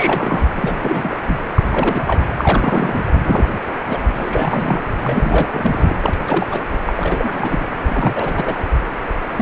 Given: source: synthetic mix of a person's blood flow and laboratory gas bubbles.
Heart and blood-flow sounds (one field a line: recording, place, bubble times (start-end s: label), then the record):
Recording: Doppler ultrasound of blood flow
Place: precordium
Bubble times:
0.00-0.43 s: bubbles
0.55-0.75 s: bubbles
0.81-1.17 s: bubbles
1.28-1.41 s: bubbles
1.56-1.62 s: bubbles
1.70-2.21 s: bubbles
2.38-3.04 s: bubbles
3.23-3.46 s: bubbles
3.65-3.85 s: bubbles
3.89-3.98 s: bubbles
4.14-4.81 s: bubbles
5.02-5.48 s: bubbles
5.52-5.96 s: bubbles
6.01-6.17 s: bubbles
6.27-6.46 s: bubbles
6.49-6.61 s: bubbles
6.88-7.66 s: bubbles
7.86-8.55 s: bubbles
9.37-9.42 s: bubbles
From the record:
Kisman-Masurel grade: 342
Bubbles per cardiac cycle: rolling drumbeat, 9 or more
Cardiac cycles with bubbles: 100%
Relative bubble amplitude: moderate (0.250 to 0.450)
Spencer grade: 3 (all of the cardiac periods contain showers or single bubble signals, but not dominating or overriding the cardiac motion signals)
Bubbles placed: anywhere in the cardiac cycle